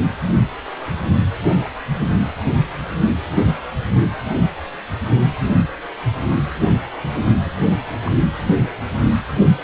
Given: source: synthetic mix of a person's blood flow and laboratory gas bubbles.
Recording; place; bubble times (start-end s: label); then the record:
Doppler ultrasound of blood flow; precordium
7.45-7.51 s: bubbles
8.05-8.12 s: bubbles
From the record:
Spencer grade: 2 (many but less than half of the cardiac periods contain bubble signals, singularly or in groups); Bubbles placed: anywhere in the cardiac cycle